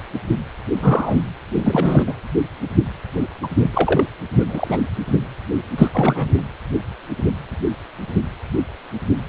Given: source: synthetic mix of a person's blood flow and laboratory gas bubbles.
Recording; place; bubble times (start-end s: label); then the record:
Doppler ultrasound of blood flow; precordium
0.75-1.21 s: bubbles
1.55-2.14 s: bubbles
3.42-3.47 s: bubbles
3.56-4.04 s: bubbles
4.32-4.79 s: bubbles
5.78-5.88 s: bubbles
5.93-6.44 s: bubbles
From the record:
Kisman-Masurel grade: 223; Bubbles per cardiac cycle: several, 3 to 8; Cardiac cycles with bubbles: 10 to 50%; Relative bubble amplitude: loud (0.450 to 0.775); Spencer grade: 2 (many but less than half of the cardiac periods contain bubble signals, singularly or in groups); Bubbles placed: anywhere in the cardiac cycle